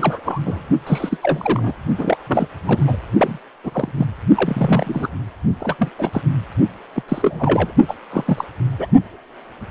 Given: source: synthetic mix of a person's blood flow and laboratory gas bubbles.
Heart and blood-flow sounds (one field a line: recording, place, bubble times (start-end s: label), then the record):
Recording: Doppler ultrasound of blood flow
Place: precordium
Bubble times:
0.00-0.21 s: bubbles
0.24-0.40 s: bubbles
0.45-0.61 s: bubbles
0.86-1.17 s: bubbles
1.23-1.75 s: bubbles
1.98-2.17 s: bubbles
2.26-2.47 s: bubbles
2.65-2.84 s: bubbles
2.87-2.97 s: bubbles
3.17-3.38 s: bubbles
3.64-3.92 s: bubbles
3.97-4.06 s: bubbles
4.35-5.14 s: bubbles
5.60-5.75 s: bubbles
5.79-5.89 s: bubbles
5.98-6.21 s: bubbles
6.95-7.02 s: bubbles
7.08-7.72 s: bubbles
7.88-7.95 s: bubbles
8.12-8.45 s: bubbles
8.79-8.87 s: bubbles
From the record:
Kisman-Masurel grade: 242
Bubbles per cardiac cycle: several, 3 to 8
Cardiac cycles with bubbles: 100%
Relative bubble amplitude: moderate (0.250 to 0.450)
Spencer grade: 3 (all of the cardiac periods contain showers or single bubble signals, but not dominating or overriding the cardiac motion signals)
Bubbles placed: only in the low amplitude regions of the cardiac cycle